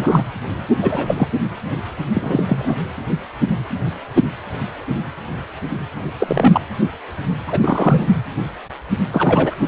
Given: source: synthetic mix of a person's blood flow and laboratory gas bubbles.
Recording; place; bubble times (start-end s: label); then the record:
Doppler ultrasound of blood flow; precordium
0.00-0.23 s: bubbles
0.81-1.27 s: bubbles
2.14-2.77 s: bubbles
6.19-6.61 s: bubbles
7.47-8.06 s: bubbles
9.12-9.68 s: bubbles
From the record:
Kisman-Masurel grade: 233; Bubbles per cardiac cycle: several, 3 to 8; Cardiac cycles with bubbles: 50 to 99%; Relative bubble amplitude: loud (0.450 to 0.775); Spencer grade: 3 (all of the cardiac periods contain showers or single bubble signals, but not dominating or overriding the cardiac motion signals); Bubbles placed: anywhere in the cardiac cycle